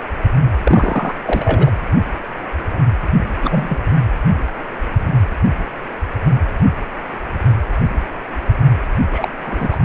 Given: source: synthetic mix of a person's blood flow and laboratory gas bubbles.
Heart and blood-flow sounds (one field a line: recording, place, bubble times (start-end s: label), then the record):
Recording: Doppler ultrasound of blood flow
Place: precordium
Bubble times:
0.64-1.15 s: bubbles
1.26-1.72 s: bubbles
3.42-3.85 s: bubbles
9.11-9.29 s: bubbles
9.45-9.77 s: bubbles
From the record:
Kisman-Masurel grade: 223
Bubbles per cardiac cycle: several, 3 to 8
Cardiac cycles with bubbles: 10 to 50%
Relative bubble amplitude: loud (0.450 to 0.775)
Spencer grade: 2 (many but less than half of the cardiac periods contain bubble signals, singularly or in groups)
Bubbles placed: anywhere in the cardiac cycle